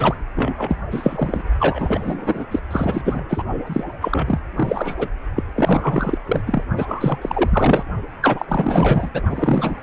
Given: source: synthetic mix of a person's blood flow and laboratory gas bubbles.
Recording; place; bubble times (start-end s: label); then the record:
Doppler ultrasound of blood flow; precordium
0.00-0.15 s: bubbles
0.35-0.54 s: bubbles
0.57-0.76 s: bubbles
0.91-1.43 s: bubbles
1.59-2.46 s: bubbles
2.51-2.60 s: bubbles
2.71-3.02 s: bubbles
3.05-3.21 s: bubbles
3.29-3.44 s: bubbles
3.66-3.84 s: bubbles
4.00-4.40 s: bubbles
4.56-5.08 s: bubbles
5.35-5.43 s: bubbles
5.55-6.18 s: bubbles
6.25-6.42 s: bubbles
6.46-6.64 s: bubbles
6.76-7.84 s: bubbles
8.21-8.46 s: bubbles
8.48-9.10 s: bubbles
9.13-9.21 s: bubbles
9.29-9.83 s: bubbles
From the record:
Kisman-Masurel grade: 444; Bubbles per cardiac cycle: continuous sound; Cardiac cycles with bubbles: 100%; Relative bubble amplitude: maximal (0.775 to 0.999); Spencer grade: 4 (maximum detectable bubble signal sounding continuously throughout systole and diastole of every cardiac period, and overriding the amplitude of the normal cardiac signals); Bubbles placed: only in the low amplitude regions of the cardiac cycle